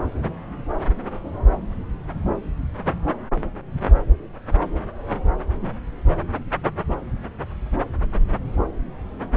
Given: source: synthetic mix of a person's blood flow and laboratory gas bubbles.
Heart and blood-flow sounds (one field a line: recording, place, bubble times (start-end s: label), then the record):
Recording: Doppler ultrasound of blood flow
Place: subclavian vein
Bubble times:
no bubbles
From the record:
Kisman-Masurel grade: 000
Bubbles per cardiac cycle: 0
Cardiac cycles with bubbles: 0%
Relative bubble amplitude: no bubbles discernible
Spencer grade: 0 (complete lack of bubble signals)